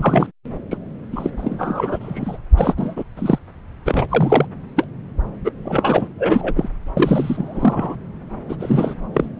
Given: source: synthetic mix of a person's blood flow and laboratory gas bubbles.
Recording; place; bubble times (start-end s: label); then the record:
Doppler ultrasound of blood flow; subclavian vein
0.00-0.27 s: bubbles
0.70-0.77 s: bubbles
1.12-1.31 s: bubbles
1.37-2.38 s: bubbles
2.56-2.73 s: bubbles
2.77-3.04 s: bubbles
3.16-3.39 s: bubbles
3.85-4.06 s: bubbles
4.09-4.46 s: bubbles
4.76-4.86 s: bubbles
5.45-5.49 s: bubbles
5.65-6.07 s: bubbles
6.18-6.69 s: bubbles
6.97-7.95 s: bubbles
8.49-8.56 s: bubbles
8.60-8.95 s: bubbles
9.13-9.29 s: bubbles
From the record:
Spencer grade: 3 (all of the cardiac periods contain showers or single bubble signals, but not dominating or overriding the cardiac motion signals); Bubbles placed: anywhere in the cardiac cycle